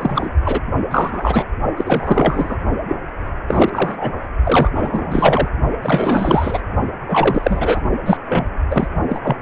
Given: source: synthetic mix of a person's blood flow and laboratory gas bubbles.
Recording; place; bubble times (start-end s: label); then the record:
Doppler ultrasound of blood flow; precordium
0.00-0.30 s: bubbles
0.44-0.60 s: bubbles
0.90-1.45 s: bubbles
1.76-2.56 s: bubbles
2.88-2.96 s: bubbles
3.48-4.13 s: bubbles
4.43-4.71 s: bubbles
4.75-5.49 s: bubbles
5.82-6.60 s: bubbles
7.08-7.82 s: bubbles
8.06-8.17 s: bubbles
8.29-8.45 s: bubbles
8.70-8.88 s: bubbles
9.09-9.20 s: bubbles
9.23-9.37 s: bubbles
From the record:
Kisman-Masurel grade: 343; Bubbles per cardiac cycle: rolling drumbeat, 9 or more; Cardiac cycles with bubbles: 100%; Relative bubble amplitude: loud (0.450 to 0.775); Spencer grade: 3 (all of the cardiac periods contain showers or single bubble signals, but not dominating or overriding the cardiac motion signals); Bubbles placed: only in the low amplitude regions of the cardiac cycle